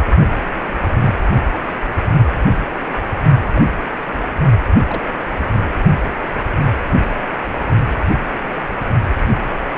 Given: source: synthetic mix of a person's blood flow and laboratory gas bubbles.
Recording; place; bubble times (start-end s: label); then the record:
Doppler ultrasound of blood flow; precordium
0.98-1.14 s: bubbles
3.54-3.61 s: bubbles
4.88-5.02 s: bubbles
From the record:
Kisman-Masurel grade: 121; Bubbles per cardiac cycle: 1 to 2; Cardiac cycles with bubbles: 10 to 50%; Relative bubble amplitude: barely perceptible (0.100 to 0.250); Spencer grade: 2 (many but less than half of the cardiac periods contain bubble signals, singularly or in groups); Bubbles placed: only in the low amplitude regions of the cardiac cycle